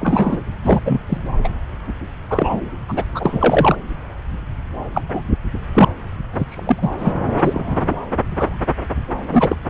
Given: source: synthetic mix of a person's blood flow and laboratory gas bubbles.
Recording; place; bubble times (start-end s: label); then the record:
Doppler ultrasound of blood flow; subclavian vein
0.00-0.41 s: bubbles
0.64-0.79 s: bubbles
0.84-1.01 s: bubbles
1.08-1.17 s: bubbles
1.44-1.49 s: bubbles
2.29-2.60 s: bubbles
2.88-3.04 s: bubbles
3.14-3.76 s: bubbles
4.95-5.02 s: bubbles
5.08-5.22 s: bubbles
5.74-5.85 s: bubbles
6.32-6.45 s: bubbles
6.49-6.91 s: bubbles
6.99-7.13 s: bubbles
7.38-7.96 s: bubbles
8.29-8.58 s: bubbles
9.31-9.56 s: bubbles
From the record:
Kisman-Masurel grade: 243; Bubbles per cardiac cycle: several, 3 to 8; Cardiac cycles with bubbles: 100%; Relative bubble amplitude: loud (0.450 to 0.775); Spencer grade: 3 (all of the cardiac periods contain showers or single bubble signals, but not dominating or overriding the cardiac motion signals); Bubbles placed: anywhere in the cardiac cycle